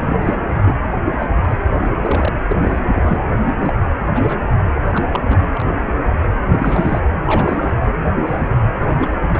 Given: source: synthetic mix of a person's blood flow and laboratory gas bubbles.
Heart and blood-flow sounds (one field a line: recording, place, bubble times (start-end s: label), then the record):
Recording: Doppler ultrasound of blood flow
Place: precordium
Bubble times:
0.00-0.35 s: bubbles
0.62-0.75 s: bubbles
1.19-1.26 s: bubbles
1.43-1.56 s: bubbles
1.72-1.89 s: bubbles
2.03-2.33 s: bubbles
2.49-2.55 s: bubbles
2.61-2.78 s: bubbles
2.92-3.19 s: bubbles
3.46-3.54 s: bubbles
3.60-3.75 s: bubbles
4.13-4.50 s: bubbles
4.85-5.04 s: bubbles
5.11-5.20 s: bubbles
5.24-5.79 s: bubbles
6.51-7.00 s: bubbles
7.26-7.90 s: bubbles
8.26-8.58 s: bubbles
8.79-9.16 s: bubbles
9.35-9.40 s: bubbles
From the record:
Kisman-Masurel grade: 232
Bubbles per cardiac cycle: several, 3 to 8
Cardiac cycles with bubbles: 50 to 99%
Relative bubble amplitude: moderate (0.250 to 0.450)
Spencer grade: 3 (all of the cardiac periods contain showers or single bubble signals, but not dominating or overriding the cardiac motion signals)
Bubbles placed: anywhere in the cardiac cycle